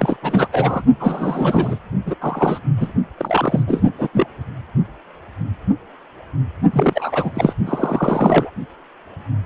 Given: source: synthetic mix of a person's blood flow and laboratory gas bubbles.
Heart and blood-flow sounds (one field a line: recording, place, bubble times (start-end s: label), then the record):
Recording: Doppler ultrasound of blood flow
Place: precordium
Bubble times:
0.00-0.16 s: bubbles
0.22-0.48 s: bubbles
0.51-0.82 s: bubbles
0.99-1.78 s: bubbles
2.05-2.15 s: bubbles
2.21-2.59 s: bubbles
2.77-2.93 s: bubbles
3.17-3.63 s: bubbles
3.67-3.90 s: bubbles
3.98-4.08 s: bubbles
4.13-4.26 s: bubbles
6.72-7.54 s: bubbles
7.66-8.50 s: bubbles
From the record:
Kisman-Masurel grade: 333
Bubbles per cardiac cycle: rolling drumbeat, 9 or more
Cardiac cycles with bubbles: 50 to 99%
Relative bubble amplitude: loud (0.450 to 0.775)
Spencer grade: 3 (all of the cardiac periods contain showers or single bubble signals, but not dominating or overriding the cardiac motion signals)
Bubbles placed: only in the low amplitude regions of the cardiac cycle